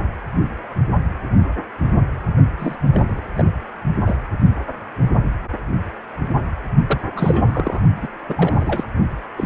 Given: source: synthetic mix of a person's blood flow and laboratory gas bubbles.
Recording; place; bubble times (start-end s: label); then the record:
Doppler ultrasound of blood flow; precordium
2.58-2.75 s: bubbles
2.92-3.21 s: bubbles
3.37-3.51 s: bubbles
4.06-4.16 s: bubbles
6.87-7.00 s: bubbles
7.15-7.80 s: bubbles
8.02-8.08 s: bubbles
8.29-8.87 s: bubbles
9.37-9.46 s: bubbles
From the record:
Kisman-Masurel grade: 232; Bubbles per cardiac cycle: several, 3 to 8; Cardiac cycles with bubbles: 50 to 99%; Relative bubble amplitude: moderate (0.250 to 0.450); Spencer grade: 3 (all of the cardiac periods contain showers or single bubble signals, but not dominating or overriding the cardiac motion signals); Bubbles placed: only in the low amplitude regions of the cardiac cycle